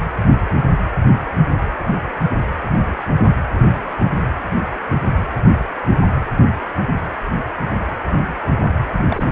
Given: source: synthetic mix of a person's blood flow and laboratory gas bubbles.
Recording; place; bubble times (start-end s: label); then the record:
Doppler ultrasound of blood flow; precordium
9.09-9.24 s: bubbles
From the record:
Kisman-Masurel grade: 111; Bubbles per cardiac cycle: 1 to 2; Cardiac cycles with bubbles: 1 to 10%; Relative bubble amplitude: barely perceptible (0.100 to 0.250); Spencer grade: 1 (occasional bubble signal discernible with the cardiac motion signal, with majority of cardiac periods free of bubbles); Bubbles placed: anywhere in the cardiac cycle